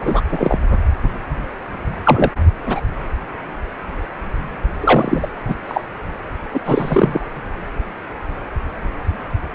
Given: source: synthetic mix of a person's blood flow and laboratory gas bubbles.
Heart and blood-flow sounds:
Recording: Doppler ultrasound of blood flow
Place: precordium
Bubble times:
0.01-0.21 s: bubbles
0.29-0.58 s: bubbles
2.04-2.31 s: bubbles
2.66-2.81 s: bubbles
4.81-5.27 s: bubbles
5.48-5.55 s: bubbles
5.67-5.81 s: bubbles
6.54-6.61 s: bubbles
6.66-7.21 s: bubbles
From the record:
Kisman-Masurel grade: 233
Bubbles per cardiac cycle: several, 3 to 8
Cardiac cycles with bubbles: 50 to 99%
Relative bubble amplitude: loud (0.450 to 0.775)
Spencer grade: 3 (all of the cardiac periods contain showers or single bubble signals, but not dominating or overriding the cardiac motion signals)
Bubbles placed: anywhere in the cardiac cycle

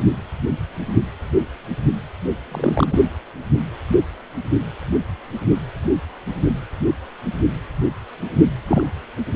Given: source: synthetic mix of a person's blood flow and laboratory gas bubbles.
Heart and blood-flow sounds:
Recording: Doppler ultrasound of blood flow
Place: precordium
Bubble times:
2.51-2.87 s: bubbles
2.90-3.00 s: bubbles
8.68-8.85 s: bubbles
From the record:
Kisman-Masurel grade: 122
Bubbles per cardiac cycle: 1 to 2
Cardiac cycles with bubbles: 10 to 50%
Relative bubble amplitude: moderate (0.250 to 0.450)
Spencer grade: 2 (many but less than half of the cardiac periods contain bubble signals, singularly or in groups)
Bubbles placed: anywhere in the cardiac cycle

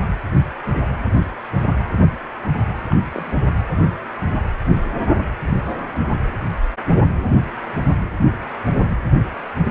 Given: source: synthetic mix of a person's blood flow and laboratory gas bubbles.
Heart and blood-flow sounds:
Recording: Doppler ultrasound of blood flow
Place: precordium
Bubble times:
2.88-2.96 s: bubbles
3.11-3.35 s: bubbles
9.67-9.70 s: bubbles
From the record:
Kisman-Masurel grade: 121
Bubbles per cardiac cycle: 1 to 2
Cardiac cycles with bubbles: 10 to 50%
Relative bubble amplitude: barely perceptible (0.100 to 0.250)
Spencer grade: 2 (many but less than half of the cardiac periods contain bubble signals, singularly or in groups)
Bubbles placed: anywhere in the cardiac cycle

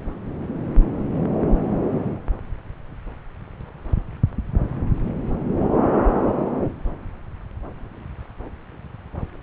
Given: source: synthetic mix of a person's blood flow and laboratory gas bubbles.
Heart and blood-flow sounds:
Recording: Doppler ultrasound of blood flow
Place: subclavian vein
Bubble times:
no bubbles
From the record:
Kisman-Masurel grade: 000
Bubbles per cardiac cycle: 0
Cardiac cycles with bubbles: 0%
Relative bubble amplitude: no bubbles discernible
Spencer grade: 0 (complete lack of bubble signals)

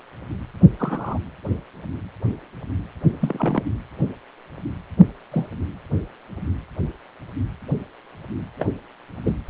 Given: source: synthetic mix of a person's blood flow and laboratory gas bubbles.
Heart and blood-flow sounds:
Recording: Doppler ultrasound of blood flow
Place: precordium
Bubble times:
0.79-1.19 s: bubbles
3.19-3.63 s: bubbles
5.31-5.48 s: bubbles
8.59-8.71 s: bubbles
9.25-9.35 s: bubbles
From the record:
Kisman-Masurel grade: 122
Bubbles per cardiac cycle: 1 to 2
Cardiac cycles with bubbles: 10 to 50%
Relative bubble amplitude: moderate (0.250 to 0.450)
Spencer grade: 2 (many but less than half of the cardiac periods contain bubble signals, singularly or in groups)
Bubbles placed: anywhere in the cardiac cycle

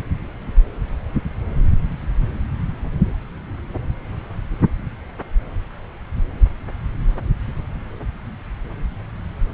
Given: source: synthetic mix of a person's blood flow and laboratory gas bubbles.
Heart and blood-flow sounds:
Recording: Doppler ultrasound of blood flow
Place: subclavian vein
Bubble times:
no bubbles
From the record:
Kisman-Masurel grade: 000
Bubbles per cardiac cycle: 0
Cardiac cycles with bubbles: 0%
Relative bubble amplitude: no bubbles discernible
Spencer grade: 0 (complete lack of bubble signals)

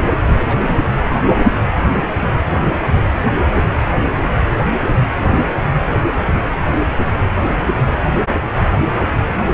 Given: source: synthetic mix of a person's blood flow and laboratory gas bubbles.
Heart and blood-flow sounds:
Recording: Doppler ultrasound of blood flow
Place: precordium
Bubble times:
0.35-0.92 s: bubbles
1.04-1.18 s: bubbles
From the record:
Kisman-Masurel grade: 211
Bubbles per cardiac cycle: several, 3 to 8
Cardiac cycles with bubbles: 1 to 10%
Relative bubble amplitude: barely perceptible (0.100 to 0.250)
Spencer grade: 1 (occasional bubble signal discernible with the cardiac motion signal, with majority of cardiac periods free of bubbles)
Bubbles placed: anywhere in the cardiac cycle

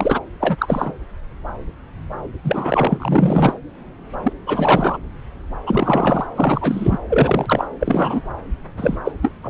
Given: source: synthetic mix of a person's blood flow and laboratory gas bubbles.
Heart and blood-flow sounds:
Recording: Doppler ultrasound of blood flow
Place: subclavian vein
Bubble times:
0.00-0.20 s: bubbles
0.40-0.92 s: bubbles
2.44-3.54 s: bubbles
4.22-4.32 s: bubbles
4.46-4.97 s: bubbles
5.66-6.27 s: bubbles
6.35-6.98 s: bubbles
7.09-7.67 s: bubbles
7.79-8.21 s: bubbles
8.77-8.98 s: bubbles
9.04-9.12 s: bubbles
9.22-9.33 s: bubbles
9.43-9.50 s: bubbles
From the record:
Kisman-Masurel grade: 333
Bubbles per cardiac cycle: rolling drumbeat, 9 or more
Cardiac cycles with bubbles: 50 to 99%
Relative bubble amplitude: loud (0.450 to 0.775)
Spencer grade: 3 (all of the cardiac periods contain showers or single bubble signals, but not dominating or overriding the cardiac motion signals)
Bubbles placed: anywhere in the cardiac cycle

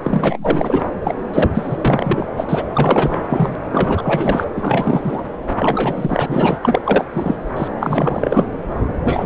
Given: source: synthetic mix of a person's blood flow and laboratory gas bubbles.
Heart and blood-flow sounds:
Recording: Doppler ultrasound of blood flow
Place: subclavian vein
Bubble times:
0.03-0.81 s: bubbles
1.03-1.15 s: bubbles
1.33-1.50 s: bubbles
1.54-2.27 s: bubbles
2.37-2.45 s: bubbles
2.49-2.64 s: bubbles
2.74-3.56 s: bubbles
3.71-4.47 s: bubbles
4.56-5.22 s: bubbles
5.56-6.57 s: bubbles
6.62-6.81 s: bubbles
6.84-7.04 s: bubbles
7.13-7.36 s: bubbles
7.56-7.68 s: bubbles
7.79-8.46 s: bubbles
9.04-9.26 s: bubbles
From the record:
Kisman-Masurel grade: 444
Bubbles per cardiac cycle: continuous sound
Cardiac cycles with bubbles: 100%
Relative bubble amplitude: maximal (0.775 to 0.999)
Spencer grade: 4 (maximum detectable bubble signal sounding continuously throughout systole and diastole of every cardiac period, and overriding the amplitude of the normal cardiac signals)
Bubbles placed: anywhere in the cardiac cycle

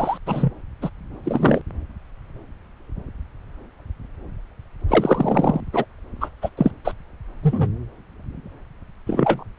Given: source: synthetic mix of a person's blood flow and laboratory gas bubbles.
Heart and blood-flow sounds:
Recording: Doppler ultrasound of blood flow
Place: subclavian vein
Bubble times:
0.00-0.18 s: bubbles
0.26-0.51 s: bubbles
0.81-0.90 s: bubbles
1.23-1.61 s: bubbles
4.88-5.60 s: bubbles
5.72-5.85 s: bubbles
6.21-6.29 s: bubbles
6.42-6.50 s: bubbles
6.57-6.71 s: bubbles
6.84-6.92 s: bubbles
7.42-7.68 s: bubbles
9.06-9.44 s: bubbles
From the record:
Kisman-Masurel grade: 233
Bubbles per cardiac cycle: several, 3 to 8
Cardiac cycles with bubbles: 50 to 99%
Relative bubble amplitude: loud (0.450 to 0.775)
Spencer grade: 3 (all of the cardiac periods contain showers or single bubble signals, but not dominating or overriding the cardiac motion signals)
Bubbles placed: anywhere in the cardiac cycle

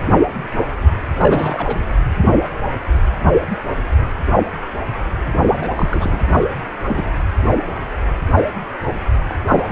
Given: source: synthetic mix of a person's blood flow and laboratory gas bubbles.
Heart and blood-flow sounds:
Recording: Doppler ultrasound of blood flow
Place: precordium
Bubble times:
1.18-1.78 s: bubbles
5.44-5.71 s: bubbles
5.75-6.19 s: bubbles
6.32-6.46 s: bubbles
6.88-7.09 s: bubbles
9.29-9.34 s: bubbles
9.49-9.65 s: bubbles
9.69-9.72 s: bubbles
From the record:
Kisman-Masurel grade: 232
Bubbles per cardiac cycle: several, 3 to 8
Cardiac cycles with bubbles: 50 to 99%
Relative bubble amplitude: moderate (0.250 to 0.450)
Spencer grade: 3 (all of the cardiac periods contain showers or single bubble signals, but not dominating or overriding the cardiac motion signals)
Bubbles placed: anywhere in the cardiac cycle

